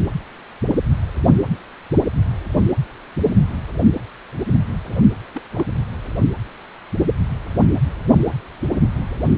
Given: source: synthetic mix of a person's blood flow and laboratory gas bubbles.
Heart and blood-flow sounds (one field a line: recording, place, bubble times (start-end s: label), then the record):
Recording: Doppler ultrasound of blood flow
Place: precordium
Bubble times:
5.34-5.42 s: bubbles
5.52-5.64 s: bubbles
From the record:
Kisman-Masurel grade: 111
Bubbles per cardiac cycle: 1 to 2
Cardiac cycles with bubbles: 1 to 10%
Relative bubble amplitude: barely perceptible (0.100 to 0.250)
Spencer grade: 1 (occasional bubble signal discernible with the cardiac motion signal, with majority of cardiac periods free of bubbles)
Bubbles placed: only in the low amplitude regions of the cardiac cycle